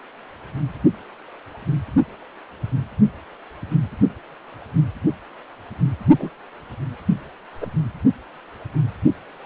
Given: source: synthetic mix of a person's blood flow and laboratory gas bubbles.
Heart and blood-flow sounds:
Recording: Doppler ultrasound of blood flow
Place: precordium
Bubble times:
6.18-6.29 s: bubbles
7.60-7.67 s: bubbles
From the record:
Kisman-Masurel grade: 122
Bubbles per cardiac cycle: 1 to 2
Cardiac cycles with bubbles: 10 to 50%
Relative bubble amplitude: moderate (0.250 to 0.450)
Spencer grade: 2 (many but less than half of the cardiac periods contain bubble signals, singularly or in groups)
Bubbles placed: only in the low amplitude regions of the cardiac cycle

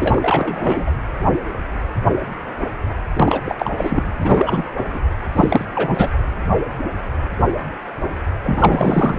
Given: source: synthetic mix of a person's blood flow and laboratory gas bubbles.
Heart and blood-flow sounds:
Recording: Doppler ultrasound of blood flow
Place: precordium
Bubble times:
0.00-0.92 s: bubbles
3.13-3.41 s: bubbles
3.46-3.55 s: bubbles
3.58-3.71 s: bubbles
3.78-4.11 s: bubbles
4.20-4.65 s: bubbles
4.93-4.99 s: bubbles
5.35-5.65 s: bubbles
5.75-6.11 s: bubbles
8.44-9.19 s: bubbles
From the record:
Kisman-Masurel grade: 333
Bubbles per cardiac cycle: rolling drumbeat, 9 or more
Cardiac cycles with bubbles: 50 to 99%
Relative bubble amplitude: loud (0.450 to 0.775)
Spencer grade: 3 (all of the cardiac periods contain showers or single bubble signals, but not dominating or overriding the cardiac motion signals)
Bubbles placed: anywhere in the cardiac cycle

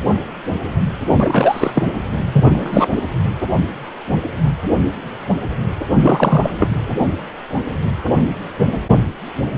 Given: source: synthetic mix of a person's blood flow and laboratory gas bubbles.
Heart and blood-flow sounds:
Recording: Doppler ultrasound of blood flow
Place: precordium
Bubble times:
1.07-1.86 s: bubbles
2.32-2.88 s: bubbles
2.95-3.02 s: bubbles
5.99-6.50 s: bubbles
6.60-6.68 s: bubbles
From the record:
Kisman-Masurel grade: 223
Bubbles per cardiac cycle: several, 3 to 8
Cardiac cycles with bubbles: 10 to 50%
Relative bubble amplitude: loud (0.450 to 0.775)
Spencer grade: 2 (many but less than half of the cardiac periods contain bubble signals, singularly or in groups)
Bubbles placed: anywhere in the cardiac cycle

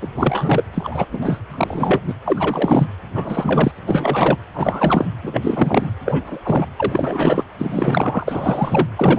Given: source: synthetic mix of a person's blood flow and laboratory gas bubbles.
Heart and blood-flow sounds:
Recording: Doppler ultrasound of blood flow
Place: precordium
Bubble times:
0.01-0.09 s: bubbles
0.14-0.64 s: bubbles
0.74-1.05 s: bubbles
1.11-1.40 s: bubbles
1.49-2.00 s: bubbles
2.07-2.14 s: bubbles
2.24-2.86 s: bubbles
3.15-3.71 s: bubbles
3.86-4.36 s: bubbles
4.54-5.06 s: bubbles
5.22-5.92 s: bubbles
6.05-6.39 s: bubbles
6.45-6.67 s: bubbles
6.76-7.43 s: bubbles
7.58-8.88 s: bubbles
8.97-9.19 s: bubbles
From the record:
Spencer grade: 3 (all of the cardiac periods contain showers or single bubble signals, but not dominating or overriding the cardiac motion signals)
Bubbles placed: anywhere in the cardiac cycle

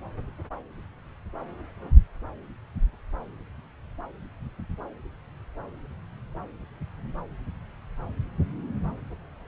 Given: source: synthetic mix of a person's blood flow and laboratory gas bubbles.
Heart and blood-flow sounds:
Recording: Doppler ultrasound of blood flow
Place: subclavian vein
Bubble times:
no bubbles
From the record:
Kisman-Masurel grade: 000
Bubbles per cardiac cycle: 0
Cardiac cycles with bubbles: 0%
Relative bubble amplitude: no bubbles discernible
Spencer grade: 0 (complete lack of bubble signals)

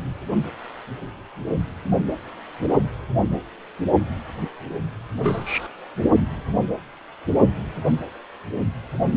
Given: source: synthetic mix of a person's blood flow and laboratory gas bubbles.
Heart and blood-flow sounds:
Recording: Doppler ultrasound of blood flow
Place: precordium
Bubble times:
5.14-5.68 s: bubbles
From the record:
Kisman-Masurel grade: 112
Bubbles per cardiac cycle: 1 to 2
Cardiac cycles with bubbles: 1 to 10%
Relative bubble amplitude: moderate (0.250 to 0.450)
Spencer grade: 1 (occasional bubble signal discernible with the cardiac motion signal, with majority of cardiac periods free of bubbles)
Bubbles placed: anywhere in the cardiac cycle

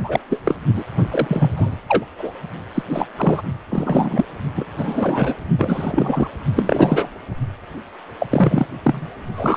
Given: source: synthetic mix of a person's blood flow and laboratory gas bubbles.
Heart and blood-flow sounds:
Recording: Doppler ultrasound of blood flow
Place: precordium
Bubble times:
0.03-0.20 s: bubbles
0.30-0.39 s: bubbles
0.43-0.55 s: bubbles
0.75-0.84 s: bubbles
1.10-1.81 s: bubbles
1.88-2.06 s: bubbles
2.18-2.31 s: bubbles
2.74-2.83 s: bubbles
2.89-3.06 s: bubbles
3.16-3.42 s: bubbles
3.70-4.25 s: bubbles
4.56-4.65 s: bubbles
4.78-5.35 s: bubbles
5.58-6.28 s: bubbles
6.56-7.08 s: bubbles
8.20-8.27 s: bubbles
8.29-8.67 s: bubbles
8.84-9.09 s: bubbles
9.33-9.57 s: bubbles
From the record:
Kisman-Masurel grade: 243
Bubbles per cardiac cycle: several, 3 to 8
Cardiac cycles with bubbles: 100%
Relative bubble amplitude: loud (0.450 to 0.775)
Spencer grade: 3 (all of the cardiac periods contain showers or single bubble signals, but not dominating or overriding the cardiac motion signals)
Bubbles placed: only in the low amplitude regions of the cardiac cycle

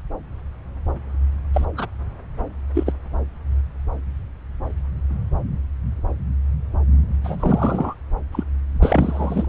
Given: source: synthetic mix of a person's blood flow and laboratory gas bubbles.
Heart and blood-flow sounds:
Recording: Doppler ultrasound of blood flow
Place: subclavian vein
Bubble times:
1.53-1.65 s: bubbles
1.77-1.87 s: bubbles
2.74-2.94 s: bubbles
7.23-7.94 s: bubbles
8.32-8.44 s: bubbles
8.83-9.46 s: bubbles
From the record:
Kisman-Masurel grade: 223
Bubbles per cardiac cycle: several, 3 to 8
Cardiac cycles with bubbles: 10 to 50%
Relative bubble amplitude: loud (0.450 to 0.775)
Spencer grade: 2 (many but less than half of the cardiac periods contain bubble signals, singularly or in groups)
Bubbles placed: anywhere in the cardiac cycle

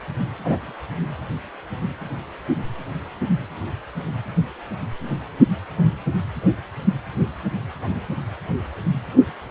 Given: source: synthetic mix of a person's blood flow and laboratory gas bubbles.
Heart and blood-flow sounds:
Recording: Doppler ultrasound of blood flow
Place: precordium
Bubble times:
0.43-0.72 s: bubbles
From the record:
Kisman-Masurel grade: 113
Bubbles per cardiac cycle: 1 to 2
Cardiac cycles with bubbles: 1 to 10%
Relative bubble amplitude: loud (0.450 to 0.775)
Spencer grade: 1 (occasional bubble signal discernible with the cardiac motion signal, with majority of cardiac periods free of bubbles)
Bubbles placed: only in the low amplitude regions of the cardiac cycle

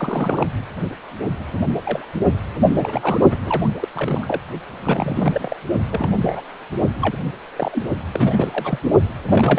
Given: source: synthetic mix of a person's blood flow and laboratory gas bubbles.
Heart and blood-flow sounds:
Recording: Doppler ultrasound of blood flow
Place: precordium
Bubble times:
0.00-0.46 s: bubbles
1.39-1.62 s: bubbles
1.82-2.08 s: bubbles
2.62-3.19 s: bubbles
3.30-3.69 s: bubbles
3.79-3.88 s: bubbles
3.95-4.41 s: bubbles
4.83-5.57 s: bubbles
5.90-6.11 s: bubbles
6.27-6.42 s: bubbles
7.01-7.17 s: bubbles
7.56-7.84 s: bubbles
8.13-8.79 s: bubbles
9.25-9.59 s: bubbles
From the record:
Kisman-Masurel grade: 242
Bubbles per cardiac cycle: several, 3 to 8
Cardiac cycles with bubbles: 100%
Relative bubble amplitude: moderate (0.250 to 0.450)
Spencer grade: 3 (all of the cardiac periods contain showers or single bubble signals, but not dominating or overriding the cardiac motion signals)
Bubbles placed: only in the low amplitude regions of the cardiac cycle

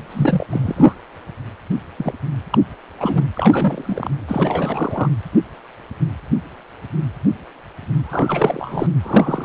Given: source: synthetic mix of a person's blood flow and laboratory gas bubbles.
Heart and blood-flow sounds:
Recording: Doppler ultrasound of blood flow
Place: precordium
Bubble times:
0.10-0.47 s: bubbles
0.49-0.95 s: bubbles
1.98-2.14 s: bubbles
2.50-2.58 s: bubbles
3.00-3.25 s: bubbles
3.35-4.11 s: bubbles
4.28-5.09 s: bubbles
8.04-8.88 s: bubbles
9.03-9.45 s: bubbles
From the record:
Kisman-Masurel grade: 233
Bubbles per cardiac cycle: several, 3 to 8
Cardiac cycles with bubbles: 50 to 99%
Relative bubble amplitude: loud (0.450 to 0.775)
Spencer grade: 3 (all of the cardiac periods contain showers or single bubble signals, but not dominating or overriding the cardiac motion signals)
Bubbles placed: anywhere in the cardiac cycle

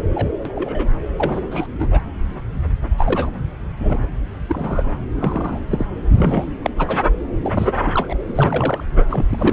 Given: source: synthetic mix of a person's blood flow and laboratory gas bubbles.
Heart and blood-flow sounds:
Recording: Doppler ultrasound of blood flow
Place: subclavian vein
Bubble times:
0.00-0.03 s: bubbles
0.14-0.27 s: bubbles
0.45-0.88 s: bubbles
1.17-1.48 s: bubbles
1.51-1.67 s: bubbles
1.79-1.88 s: bubbles
1.91-2.00 s: bubbles
2.98-3.30 s: bubbles
3.79-4.07 s: bubbles
4.48-4.94 s: bubbles
5.15-5.60 s: bubbles
5.70-5.86 s: bubbles
6.15-6.54 s: bubbles
6.62-6.71 s: bubbles
6.78-6.98 s: bubbles
7.42-7.73 s: bubbles
7.85-8.17 s: bubbles
8.28-8.84 s: bubbles
9.00-9.04 s: bubbles
9.10-9.26 s: bubbles
9.29-9.53 s: bubbles
From the record:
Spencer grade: 3 (all of the cardiac periods contain showers or single bubble signals, but not dominating or overriding the cardiac motion signals)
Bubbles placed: anywhere in the cardiac cycle

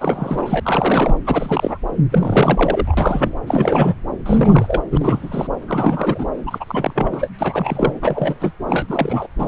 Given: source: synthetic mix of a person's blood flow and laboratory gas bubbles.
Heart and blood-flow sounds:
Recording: Doppler ultrasound of blood flow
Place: subclavian vein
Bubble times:
0.00-0.60 s: bubbles
0.63-1.15 s: bubbles
1.26-1.77 s: bubbles
2.11-3.37 s: bubbles
3.46-3.94 s: bubbles
4.26-4.81 s: bubbles
4.92-5.47 s: bubbles
5.67-6.26 s: bubbles
6.46-6.64 s: bubbles
6.67-7.29 s: bubbles
7.38-7.93 s: bubbles
8.02-8.52 s: bubbles
8.67-9.27 s: bubbles
9.38-9.48 s: bubbles
From the record:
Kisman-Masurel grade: 343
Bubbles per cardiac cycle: rolling drumbeat, 9 or more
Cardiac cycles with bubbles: 100%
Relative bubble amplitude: loud (0.450 to 0.775)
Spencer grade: 3 (all of the cardiac periods contain showers or single bubble signals, but not dominating or overriding the cardiac motion signals)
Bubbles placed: anywhere in the cardiac cycle

